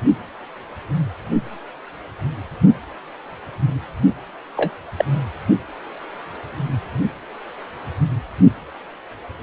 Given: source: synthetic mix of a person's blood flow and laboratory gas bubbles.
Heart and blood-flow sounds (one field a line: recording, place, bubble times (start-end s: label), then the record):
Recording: Doppler ultrasound of blood flow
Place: precordium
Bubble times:
4.56-4.71 s: bubbles
4.98-5.04 s: bubbles
From the record:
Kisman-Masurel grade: 112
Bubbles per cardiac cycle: 1 to 2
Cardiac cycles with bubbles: 1 to 10%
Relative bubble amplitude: moderate (0.250 to 0.450)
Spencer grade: 1 (occasional bubble signal discernible with the cardiac motion signal, with majority of cardiac periods free of bubbles)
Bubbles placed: anywhere in the cardiac cycle